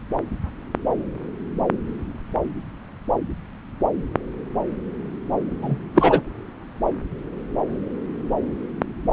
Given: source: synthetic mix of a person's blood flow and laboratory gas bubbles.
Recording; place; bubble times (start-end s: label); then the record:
Doppler ultrasound of blood flow; subclavian vein
5.62-5.78 s: bubbles
5.95-6.21 s: bubbles
From the record:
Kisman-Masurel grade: 213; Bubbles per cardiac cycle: several, 3 to 8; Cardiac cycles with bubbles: 1 to 10%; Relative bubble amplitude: loud (0.450 to 0.775); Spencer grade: 1 (occasional bubble signal discernible with the cardiac motion signal, with majority of cardiac periods free of bubbles); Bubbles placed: anywhere in the cardiac cycle